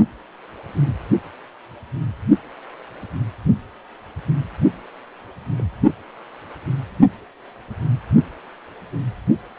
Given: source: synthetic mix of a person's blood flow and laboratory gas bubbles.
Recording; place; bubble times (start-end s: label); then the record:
Doppler ultrasound of blood flow; precordium
5.56-5.64 s: bubbles
From the record:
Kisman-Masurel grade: 111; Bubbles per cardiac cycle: 1 to 2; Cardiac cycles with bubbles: 1 to 10%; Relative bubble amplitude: barely perceptible (0.100 to 0.250); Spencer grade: 1 (occasional bubble signal discernible with the cardiac motion signal, with majority of cardiac periods free of bubbles); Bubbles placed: only in the low amplitude regions of the cardiac cycle